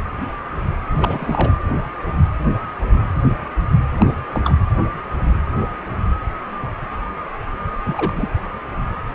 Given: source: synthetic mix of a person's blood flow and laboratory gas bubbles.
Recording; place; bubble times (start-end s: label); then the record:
Doppler ultrasound of blood flow; precordium
0.96-1.56 s: bubbles
3.98-4.17 s: bubbles
4.33-4.55 s: bubbles
7.83-8.29 s: bubbles
From the record:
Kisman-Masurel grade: 222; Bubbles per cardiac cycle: several, 3 to 8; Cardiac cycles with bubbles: 10 to 50%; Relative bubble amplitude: moderate (0.250 to 0.450); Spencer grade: 2 (many but less than half of the cardiac periods contain bubble signals, singularly or in groups); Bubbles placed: anywhere in the cardiac cycle